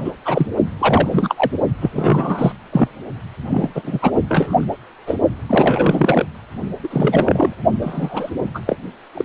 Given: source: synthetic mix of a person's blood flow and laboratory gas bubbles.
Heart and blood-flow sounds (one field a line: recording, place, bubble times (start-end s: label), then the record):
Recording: Doppler ultrasound of blood flow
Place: precordium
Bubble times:
0.00-0.12 s: bubbles
0.25-0.47 s: bubbles
0.79-1.51 s: bubbles
1.81-2.52 s: bubbles
2.72-2.89 s: bubbles
3.50-3.71 s: bubbles
3.75-3.99 s: bubbles
4.02-4.11 s: bubbles
4.29-4.64 s: bubbles
5.07-5.16 s: bubbles
5.48-6.25 s: bubbles
6.83-7.54 s: bubbles
7.82-8.29 s: bubbles
8.54-8.60 s: bubbles
8.66-8.76 s: bubbles
9.14-9.24 s: bubbles
From the record:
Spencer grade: 3 (all of the cardiac periods contain showers or single bubble signals, but not dominating or overriding the cardiac motion signals)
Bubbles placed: only in the low amplitude regions of the cardiac cycle